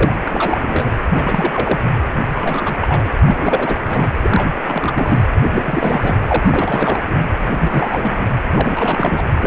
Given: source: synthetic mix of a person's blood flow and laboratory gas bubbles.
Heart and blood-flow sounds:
Doppler ultrasound of blood flow; precordium
0.00-0.13 s: bubbles
0.26-0.91 s: bubbles
1.09-1.80 s: bubbles
2.34-2.76 s: bubbles
2.81-3.12 s: bubbles
3.25-3.80 s: bubbles
3.85-4.11 s: bubbles
4.23-4.52 s: bubbles
4.62-5.23 s: bubbles
5.51-6.17 s: bubbles
6.25-6.99 s: bubbles
7.10-7.16 s: bubbles
7.40-7.47 s: bubbles
7.61-8.26 s: bubbles
8.54-9.23 s: bubbles
9.40-9.47 s: bubbles
From the record:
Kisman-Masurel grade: 342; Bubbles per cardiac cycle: rolling drumbeat, 9 or more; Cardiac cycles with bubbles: 100%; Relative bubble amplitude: moderate (0.250 to 0.450); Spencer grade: 3 (all of the cardiac periods contain showers or single bubble signals, but not dominating or overriding the cardiac motion signals); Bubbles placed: anywhere in the cardiac cycle

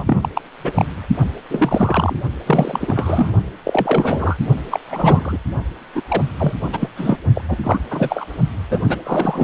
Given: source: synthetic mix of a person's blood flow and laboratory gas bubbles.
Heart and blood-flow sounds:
Doppler ultrasound of blood flow; precordium
0.00-0.29 s: bubbles
0.35-0.41 s: bubbles
0.63-0.72 s: bubbles
0.74-0.85 s: bubbles
1.50-2.16 s: bubbles
2.46-3.32 s: bubbles
3.65-4.37 s: bubbles
4.71-4.80 s: bubbles
4.88-5.38 s: bubbles
5.95-6.02 s: bubbles
6.08-6.23 s: bubbles
6.39-6.53 s: bubbles
6.72-6.89 s: bubbles
6.96-7.18 s: bubbles
7.34-7.42 s: bubbles
7.49-7.58 s: bubbles
7.63-7.80 s: bubbles
7.91-8.26 s: bubbles
8.70-8.79 s: bubbles
8.84-8.96 s: bubbles
9.04-9.43 s: bubbles
From the record:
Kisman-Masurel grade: 343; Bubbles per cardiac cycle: rolling drumbeat, 9 or more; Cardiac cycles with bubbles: 100%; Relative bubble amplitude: loud (0.450 to 0.775); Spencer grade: 3 (all of the cardiac periods contain showers or single bubble signals, but not dominating or overriding the cardiac motion signals); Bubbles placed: only in the low amplitude regions of the cardiac cycle

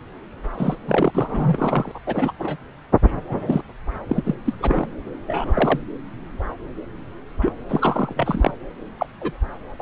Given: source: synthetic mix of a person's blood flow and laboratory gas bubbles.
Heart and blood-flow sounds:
Doppler ultrasound of blood flow; subclavian vein
0.57-0.76 s: bubbles
0.88-1.10 s: bubbles
1.15-1.92 s: bubbles
1.94-1.99 s: bubbles
2.06-2.32 s: bubbles
2.39-2.56 s: bubbles
3.29-3.61 s: bubbles
4.08-4.35 s: bubbles
4.45-4.54 s: bubbles
4.60-4.88 s: bubbles
5.27-5.79 s: bubbles
7.41-7.52 s: bubbles
7.68-8.54 s: bubbles
8.98-9.07 s: bubbles
9.21-9.37 s: bubbles
9.79-9.82 s: bubbles
From the record:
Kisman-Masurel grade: 232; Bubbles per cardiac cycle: several, 3 to 8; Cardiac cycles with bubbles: 50 to 99%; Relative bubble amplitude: moderate (0.250 to 0.450); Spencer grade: 3 (all of the cardiac periods contain showers or single bubble signals, but not dominating or overriding the cardiac motion signals); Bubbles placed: anywhere in the cardiac cycle

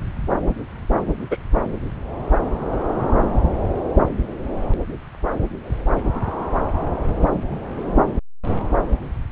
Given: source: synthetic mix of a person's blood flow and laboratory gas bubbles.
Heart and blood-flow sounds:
Doppler ultrasound of blood flow; subclavian vein
1.31-1.37 s: bubbles
From the record:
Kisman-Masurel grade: 113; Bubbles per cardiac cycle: 1 to 2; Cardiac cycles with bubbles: 1 to 10%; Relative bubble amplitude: loud (0.450 to 0.775); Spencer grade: 1 (occasional bubble signal discernible with the cardiac motion signal, with majority of cardiac periods free of bubbles); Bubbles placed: anywhere in the cardiac cycle

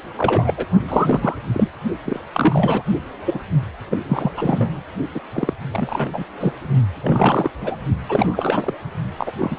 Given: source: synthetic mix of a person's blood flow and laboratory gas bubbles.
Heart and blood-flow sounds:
Doppler ultrasound of blood flow; precordium
0.17-0.66 s: bubbles
0.88-1.36 s: bubbles
1.47-1.68 s: bubbles
2.05-2.19 s: bubbles
2.34-2.83 s: bubbles
3.25-3.40 s: bubbles
3.89-3.98 s: bubbles
4.08-4.31 s: bubbles
4.37-4.83 s: bubbles
5.15-5.20 s: bubbles
5.33-5.54 s: bubbles
5.72-6.10 s: bubbles
6.12-6.26 s: bubbles
6.40-6.53 s: bubbles
7.03-7.51 s: bubbles
7.61-7.76 s: bubbles
8.08-8.74 s: bubbles
9.17-9.31 s: bubbles
9.38-9.59 s: bubbles
From the record:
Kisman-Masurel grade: 343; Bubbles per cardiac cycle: rolling drumbeat, 9 or more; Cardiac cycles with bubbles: 100%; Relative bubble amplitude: loud (0.450 to 0.775); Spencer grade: 3 (all of the cardiac periods contain showers or single bubble signals, but not dominating or overriding the cardiac motion signals); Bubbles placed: only in the low amplitude regions of the cardiac cycle

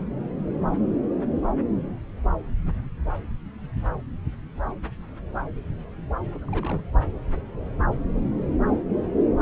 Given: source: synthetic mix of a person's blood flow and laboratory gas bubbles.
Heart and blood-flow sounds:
Doppler ultrasound of blood flow; subclavian vein
6.33-6.49 s: bubbles
6.52-6.82 s: bubbles
From the record:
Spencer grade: 2 (many but less than half of the cardiac periods contain bubble signals, singularly or in groups); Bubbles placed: anywhere in the cardiac cycle

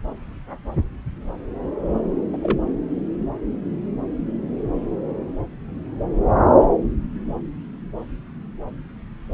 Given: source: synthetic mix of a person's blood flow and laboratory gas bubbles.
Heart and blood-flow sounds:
Doppler ultrasound of blood flow; subclavian vein
2.32-2.36 s: bubbles
2.42-2.57 s: bubbles
From the record:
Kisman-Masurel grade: 121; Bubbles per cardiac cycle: 1 to 2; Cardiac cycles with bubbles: 10 to 50%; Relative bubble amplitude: barely perceptible (0.100 to 0.250); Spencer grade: 2 (many but less than half of the cardiac periods contain bubble signals, singularly or in groups); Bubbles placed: anywhere in the cardiac cycle

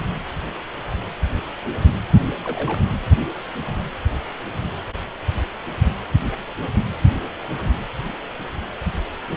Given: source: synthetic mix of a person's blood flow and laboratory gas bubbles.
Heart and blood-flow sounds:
Doppler ultrasound of blood flow; precordium
2.44-2.79 s: bubbles
From the record:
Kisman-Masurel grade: 111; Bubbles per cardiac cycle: 1 to 2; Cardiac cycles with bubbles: 1 to 10%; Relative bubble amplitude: barely perceptible (0.100 to 0.250); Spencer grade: 1 (occasional bubble signal discernible with the cardiac motion signal, with majority of cardiac periods free of bubbles); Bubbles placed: anywhere in the cardiac cycle

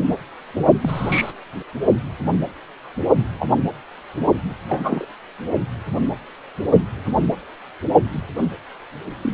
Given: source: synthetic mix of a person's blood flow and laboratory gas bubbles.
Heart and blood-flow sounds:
Doppler ultrasound of blood flow; precordium
0.81-1.33 s: bubbles
3.39-3.47 s: bubbles
4.69-5.05 s: bubbles
9.22-9.34 s: bubbles
From the record:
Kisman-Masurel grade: 122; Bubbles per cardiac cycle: 1 to 2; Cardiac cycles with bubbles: 10 to 50%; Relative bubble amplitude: moderate (0.250 to 0.450); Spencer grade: 2 (many but less than half of the cardiac periods contain bubble signals, singularly or in groups); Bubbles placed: only in the low amplitude regions of the cardiac cycle

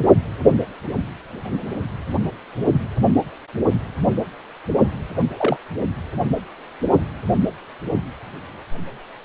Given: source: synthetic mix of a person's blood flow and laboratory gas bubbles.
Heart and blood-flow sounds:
Doppler ultrasound of blood flow; precordium
5.37-5.57 s: bubbles
From the record:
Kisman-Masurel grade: 112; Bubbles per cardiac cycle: 1 to 2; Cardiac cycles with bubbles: 1 to 10%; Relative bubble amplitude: moderate (0.250 to 0.450); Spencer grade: 1 (occasional bubble signal discernible with the cardiac motion signal, with majority of cardiac periods free of bubbles); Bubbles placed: only in the low amplitude regions of the cardiac cycle

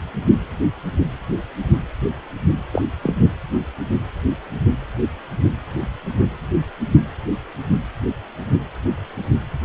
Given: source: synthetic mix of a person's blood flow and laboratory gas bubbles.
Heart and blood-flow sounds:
Doppler ultrasound of blood flow; precordium
2.72-2.82 s: bubbles
3.03-3.15 s: bubbles
From the record:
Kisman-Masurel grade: 212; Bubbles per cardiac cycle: several, 3 to 8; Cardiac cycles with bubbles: 1 to 10%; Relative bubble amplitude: moderate (0.250 to 0.450); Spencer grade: 1 (occasional bubble signal discernible with the cardiac motion signal, with majority of cardiac periods free of bubbles); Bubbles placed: anywhere in the cardiac cycle

